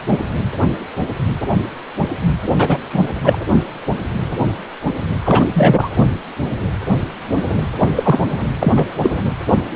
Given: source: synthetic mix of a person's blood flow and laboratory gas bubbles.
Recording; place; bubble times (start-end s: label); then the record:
Doppler ultrasound of blood flow; precordium
0.07-0.20 s: bubbles
2.58-2.79 s: bubbles
2.89-3.10 s: bubbles
3.24-3.39 s: bubbles
5.25-5.46 s: bubbles
5.53-5.90 s: bubbles
7.78-7.89 s: bubbles
7.96-8.20 s: bubbles
8.59-8.72 s: bubbles
8.75-8.86 s: bubbles
9.01-9.10 s: bubbles
9.14-9.23 s: bubbles
From the record:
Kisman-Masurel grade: 223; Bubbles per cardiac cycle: several, 3 to 8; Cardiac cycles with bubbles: 10 to 50%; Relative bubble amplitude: loud (0.450 to 0.775); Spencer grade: 2 (many but less than half of the cardiac periods contain bubble signals, singularly or in groups); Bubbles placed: anywhere in the cardiac cycle